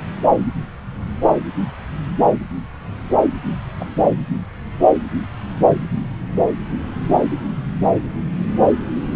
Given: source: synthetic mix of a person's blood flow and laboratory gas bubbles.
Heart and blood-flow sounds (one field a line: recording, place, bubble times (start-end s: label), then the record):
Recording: Doppler ultrasound of blood flow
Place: subclavian vein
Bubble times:
3.79-3.87 s: bubbles
From the record:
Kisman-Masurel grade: 112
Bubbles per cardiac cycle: 1 to 2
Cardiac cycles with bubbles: 1 to 10%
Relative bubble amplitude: moderate (0.250 to 0.450)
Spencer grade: 1 (occasional bubble signal discernible with the cardiac motion signal, with majority of cardiac periods free of bubbles)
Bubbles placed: anywhere in the cardiac cycle